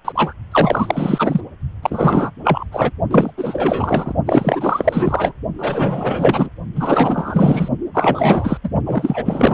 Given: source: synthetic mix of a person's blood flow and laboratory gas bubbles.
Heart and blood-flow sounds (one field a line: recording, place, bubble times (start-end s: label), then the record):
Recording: Doppler ultrasound of blood flow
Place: precordium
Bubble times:
0.04-0.12 s: bubbles
0.15-0.33 s: bubbles
0.52-1.41 s: bubbles
1.82-2.30 s: bubbles
2.43-2.65 s: bubbles
2.71-2.91 s: bubbles
3.11-3.31 s: bubbles
3.37-4.13 s: bubbles
4.26-5.33 s: bubbles
5.58-6.50 s: bubbles
6.75-7.68 s: bubbles
7.94-8.57 s: bubbles
8.63-8.70 s: bubbles
8.86-9.54 s: bubbles
From the record:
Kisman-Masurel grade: 444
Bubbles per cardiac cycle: continuous sound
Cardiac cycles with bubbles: 100%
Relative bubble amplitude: maximal (0.775 to 0.999)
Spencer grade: 4 (maximum detectable bubble signal sounding continuously throughout systole and diastole of every cardiac period, and overriding the amplitude of the normal cardiac signals)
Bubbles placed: only in the low amplitude regions of the cardiac cycle